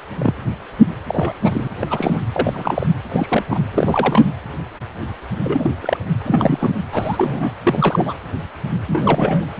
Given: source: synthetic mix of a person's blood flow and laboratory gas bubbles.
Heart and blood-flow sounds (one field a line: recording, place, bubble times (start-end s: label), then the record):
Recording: Doppler ultrasound of blood flow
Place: precordium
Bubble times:
0.19-0.34 s: bubbles
1.06-1.33 s: bubbles
1.41-1.68 s: bubbles
1.81-1.86 s: bubbles
1.90-2.21 s: bubbles
2.33-2.86 s: bubbles
3.11-3.44 s: bubbles
3.50-3.59 s: bubbles
3.74-4.25 s: bubbles
5.43-5.71 s: bubbles
5.80-5.97 s: bubbles
6.20-6.70 s: bubbles
6.92-7.53 s: bubbles
7.64-8.14 s: bubbles
8.87-9.45 s: bubbles
From the record:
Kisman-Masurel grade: 232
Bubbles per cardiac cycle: several, 3 to 8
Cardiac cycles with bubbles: 50 to 99%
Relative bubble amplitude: moderate (0.250 to 0.450)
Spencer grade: 3 (all of the cardiac periods contain showers or single bubble signals, but not dominating or overriding the cardiac motion signals)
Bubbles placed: anywhere in the cardiac cycle